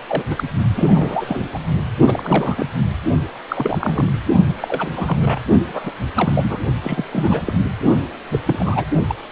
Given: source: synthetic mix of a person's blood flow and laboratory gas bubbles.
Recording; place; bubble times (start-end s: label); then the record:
Doppler ultrasound of blood flow; precordium
0.08-0.23 s: bubbles
0.30-0.44 s: bubbles
0.76-1.48 s: bubbles
1.52-1.59 s: bubbles
2.06-2.66 s: bubbles
3.48-4.16 s: bubbles
4.55-4.91 s: bubbles
4.96-5.40 s: bubbles
5.67-5.91 s: bubbles
6.15-6.59 s: bubbles
6.83-7.04 s: bubbles
7.12-7.54 s: bubbles
8.32-8.40 s: bubbles
8.45-8.84 s: bubbles
8.91-8.99 s: bubbles
9.08-9.15 s: bubbles
From the record:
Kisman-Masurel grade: 342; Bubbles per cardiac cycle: rolling drumbeat, 9 or more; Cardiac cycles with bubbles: 100%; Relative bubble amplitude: moderate (0.250 to 0.450); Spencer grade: 3 (all of the cardiac periods contain showers or single bubble signals, but not dominating or overriding the cardiac motion signals); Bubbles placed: only in the low amplitude regions of the cardiac cycle